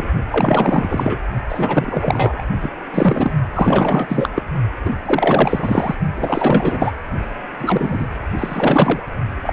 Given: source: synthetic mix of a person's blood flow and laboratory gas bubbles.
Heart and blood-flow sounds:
Doppler ultrasound of blood flow; precordium
0.00-0.07 s: bubbles
0.31-1.19 s: bubbles
1.48-2.44 s: bubbles
2.61-2.71 s: bubbles
2.94-3.33 s: bubbles
3.54-4.29 s: bubbles
4.35-4.42 s: bubbles
4.85-4.91 s: bubbles
5.05-5.95 s: bubbles
6.15-6.92 s: bubbles
7.58-8.09 s: bubbles
8.38-9.03 s: bubbles
9.43-9.53 s: bubbles
From the record:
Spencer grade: 4 (maximum detectable bubble signal sounding continuously throughout systole and diastole of every cardiac period, and overriding the amplitude of the normal cardiac signals); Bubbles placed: only in the low amplitude regions of the cardiac cycle

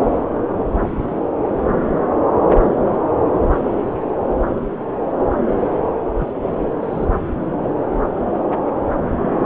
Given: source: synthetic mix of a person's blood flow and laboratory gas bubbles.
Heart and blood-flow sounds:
Doppler ultrasound of blood flow; subclavian vein
6.18-6.33 s: bubbles
6.82-7.05 s: bubbles
From the record:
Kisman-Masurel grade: 212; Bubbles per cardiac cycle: several, 3 to 8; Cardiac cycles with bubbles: 1 to 10%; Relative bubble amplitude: moderate (0.250 to 0.450); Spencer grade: 1 (occasional bubble signal discernible with the cardiac motion signal, with majority of cardiac periods free of bubbles); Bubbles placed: anywhere in the cardiac cycle

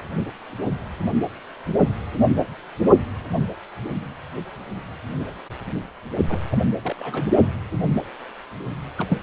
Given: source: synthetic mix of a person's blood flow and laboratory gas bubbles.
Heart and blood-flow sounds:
Doppler ultrasound of blood flow; precordium
6.29-6.40 s: bubbles
6.52-6.57 s: bubbles
6.82-6.96 s: bubbles
6.99-7.30 s: bubbles
8.97-9.19 s: bubbles
From the record:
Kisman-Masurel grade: 221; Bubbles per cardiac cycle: several, 3 to 8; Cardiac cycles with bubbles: 10 to 50%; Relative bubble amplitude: barely perceptible (0.100 to 0.250); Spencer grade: 2 (many but less than half of the cardiac periods contain bubble signals, singularly or in groups); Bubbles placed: only in the low amplitude regions of the cardiac cycle

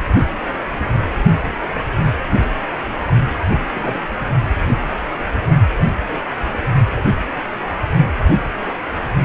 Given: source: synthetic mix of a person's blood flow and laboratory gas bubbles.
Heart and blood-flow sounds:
Doppler ultrasound of blood flow; precordium
3.75-3.98 s: bubbles
From the record:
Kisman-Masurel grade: 112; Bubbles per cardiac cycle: 1 to 2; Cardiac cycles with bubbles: 1 to 10%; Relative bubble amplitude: moderate (0.250 to 0.450); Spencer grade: 1 (occasional bubble signal discernible with the cardiac motion signal, with majority of cardiac periods free of bubbles); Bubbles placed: only in the low amplitude regions of the cardiac cycle

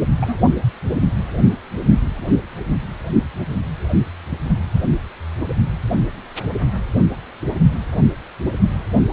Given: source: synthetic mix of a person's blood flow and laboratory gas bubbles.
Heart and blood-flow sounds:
Doppler ultrasound of blood flow; precordium
0.20-0.35 s: bubbles
From the record:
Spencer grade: 1 (occasional bubble signal discernible with the cardiac motion signal, with majority of cardiac periods free of bubbles); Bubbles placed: only in the low amplitude regions of the cardiac cycle

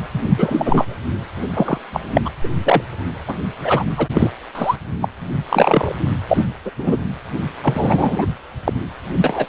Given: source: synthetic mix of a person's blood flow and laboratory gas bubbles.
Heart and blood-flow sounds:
Doppler ultrasound of blood flow; precordium
0.37-0.96 s: bubbles
1.54-1.78 s: bubbles
1.93-2.00 s: bubbles
2.15-2.21 s: bubbles
2.25-2.30 s: bubbles
2.44-2.49 s: bubbles
2.60-2.84 s: bubbles
3.27-3.34 s: bubbles
3.62-3.83 s: bubbles
3.96-4.07 s: bubbles
4.14-4.31 s: bubbles
4.54-4.76 s: bubbles
5.01-5.06 s: bubbles
5.50-5.93 s: bubbles
6.28-6.47 s: bubbles
6.64-6.71 s: bubbles
6.79-6.97 s: bubbles
7.63-8.26 s: bubbles
8.64-8.73 s: bubbles
9.24-9.46 s: bubbles
From the record:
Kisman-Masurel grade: 243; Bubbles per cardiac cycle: several, 3 to 8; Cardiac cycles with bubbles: 100%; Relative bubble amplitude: loud (0.450 to 0.775); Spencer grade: 3 (all of the cardiac periods contain showers or single bubble signals, but not dominating or overriding the cardiac motion signals); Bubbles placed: anywhere in the cardiac cycle

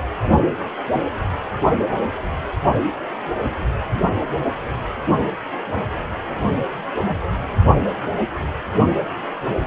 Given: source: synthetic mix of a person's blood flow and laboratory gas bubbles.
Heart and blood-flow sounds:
Doppler ultrasound of blood flow; precordium
no bubbles
From the record:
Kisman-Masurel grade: 000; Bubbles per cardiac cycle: 0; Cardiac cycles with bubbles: 0%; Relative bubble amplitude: no bubbles discernible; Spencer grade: 0 (complete lack of bubble signals)

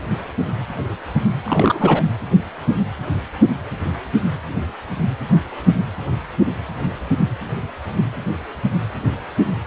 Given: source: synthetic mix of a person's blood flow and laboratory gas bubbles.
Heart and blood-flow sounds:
Doppler ultrasound of blood flow; precordium
1.44-2.06 s: bubbles
From the record:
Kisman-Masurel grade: 212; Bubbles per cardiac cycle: several, 3 to 8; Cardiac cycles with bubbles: 1 to 10%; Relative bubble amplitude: moderate (0.250 to 0.450); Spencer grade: 1 (occasional bubble signal discernible with the cardiac motion signal, with majority of cardiac periods free of bubbles); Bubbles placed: anywhere in the cardiac cycle

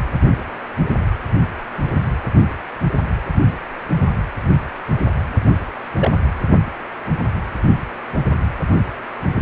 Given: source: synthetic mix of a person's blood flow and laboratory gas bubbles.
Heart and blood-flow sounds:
Doppler ultrasound of blood flow; precordium
5.97-6.17 s: bubbles
From the record:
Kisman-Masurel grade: 112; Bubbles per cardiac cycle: 1 to 2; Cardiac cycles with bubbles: 1 to 10%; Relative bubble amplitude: moderate (0.250 to 0.450); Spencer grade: 1 (occasional bubble signal discernible with the cardiac motion signal, with majority of cardiac periods free of bubbles); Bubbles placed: anywhere in the cardiac cycle

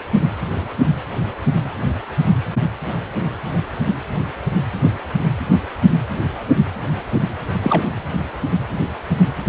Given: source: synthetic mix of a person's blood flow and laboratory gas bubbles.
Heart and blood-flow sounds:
Doppler ultrasound of blood flow; precordium
7.62-7.83 s: bubbles
From the record:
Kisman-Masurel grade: 113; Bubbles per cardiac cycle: 1 to 2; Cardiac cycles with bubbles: 1 to 10%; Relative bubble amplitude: loud (0.450 to 0.775); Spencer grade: 1 (occasional bubble signal discernible with the cardiac motion signal, with majority of cardiac periods free of bubbles); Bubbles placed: anywhere in the cardiac cycle

